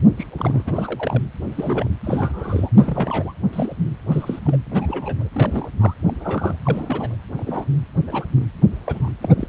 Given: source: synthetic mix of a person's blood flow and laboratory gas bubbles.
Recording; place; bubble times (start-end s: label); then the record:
Doppler ultrasound of blood flow; precordium
0.17-0.27 s: bubbles
0.32-0.62 s: bubbles
0.66-1.23 s: bubbles
1.55-1.86 s: bubbles
2.04-2.69 s: bubbles
2.77-3.33 s: bubbles
3.52-3.75 s: bubbles
4.09-4.39 s: bubbles
4.44-4.57 s: bubbles
4.70-5.28 s: bubbles
5.33-5.70 s: bubbles
5.80-5.93 s: bubbles
6.06-6.13 s: bubbles
6.19-6.56 s: bubbles
6.63-7.17 s: bubbles
7.36-7.65 s: bubbles
8.07-8.25 s: bubbles
8.35-8.45 s: bubbles
8.86-9.12 s: bubbles
9.22-9.49 s: bubbles
From the record:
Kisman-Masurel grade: 242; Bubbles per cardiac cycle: several, 3 to 8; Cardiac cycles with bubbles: 100%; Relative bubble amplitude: moderate (0.250 to 0.450); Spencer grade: 3 (all of the cardiac periods contain showers or single bubble signals, but not dominating or overriding the cardiac motion signals); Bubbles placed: anywhere in the cardiac cycle